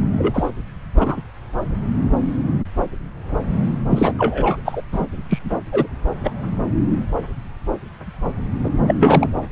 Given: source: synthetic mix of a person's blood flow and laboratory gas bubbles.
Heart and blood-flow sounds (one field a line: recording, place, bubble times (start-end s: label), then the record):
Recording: Doppler ultrasound of blood flow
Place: subclavian vein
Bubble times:
0.17-0.51 s: bubbles
0.93-1.21 s: bubbles
3.90-4.12 s: bubbles
4.18-4.56 s: bubbles
4.65-4.83 s: bubbles
4.92-5.06 s: bubbles
5.29-5.39 s: bubbles
5.72-5.88 s: bubbles
6.23-6.33 s: bubbles
8.63-8.70 s: bubbles
8.87-8.95 s: bubbles
9.01-9.28 s: bubbles
From the record:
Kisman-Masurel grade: 233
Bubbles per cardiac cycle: several, 3 to 8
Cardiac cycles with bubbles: 50 to 99%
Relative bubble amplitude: loud (0.450 to 0.775)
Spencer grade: 3 (all of the cardiac periods contain showers or single bubble signals, but not dominating or overriding the cardiac motion signals)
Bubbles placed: anywhere in the cardiac cycle